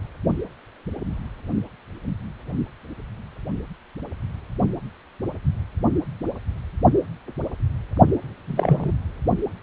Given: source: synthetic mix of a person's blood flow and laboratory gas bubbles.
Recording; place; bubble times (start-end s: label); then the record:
Doppler ultrasound of blood flow; precordium
8.47-8.93 s: bubbles
From the record:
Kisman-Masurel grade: 113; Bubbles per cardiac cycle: 1 to 2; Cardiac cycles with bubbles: 1 to 10%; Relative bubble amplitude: loud (0.450 to 0.775); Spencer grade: 1 (occasional bubble signal discernible with the cardiac motion signal, with majority of cardiac periods free of bubbles); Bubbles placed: only in the low amplitude regions of the cardiac cycle